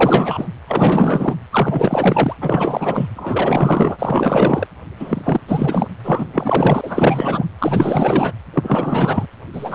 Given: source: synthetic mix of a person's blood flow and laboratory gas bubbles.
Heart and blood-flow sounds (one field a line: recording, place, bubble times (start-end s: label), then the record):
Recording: Doppler ultrasound of blood flow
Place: precordium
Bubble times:
0.00-0.48 s: bubbles
0.68-1.35 s: bubbles
1.50-2.34 s: bubbles
2.41-3.08 s: bubbles
3.16-4.67 s: bubbles
4.99-5.41 s: bubbles
5.48-5.88 s: bubbles
6.04-7.46 s: bubbles
7.58-8.32 s: bubbles
8.53-9.26 s: bubbles
9.52-9.74 s: bubbles
From the record:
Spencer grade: 4 (maximum detectable bubble signal sounding continuously throughout systole and diastole of every cardiac period, and overriding the amplitude of the normal cardiac signals)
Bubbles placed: anywhere in the cardiac cycle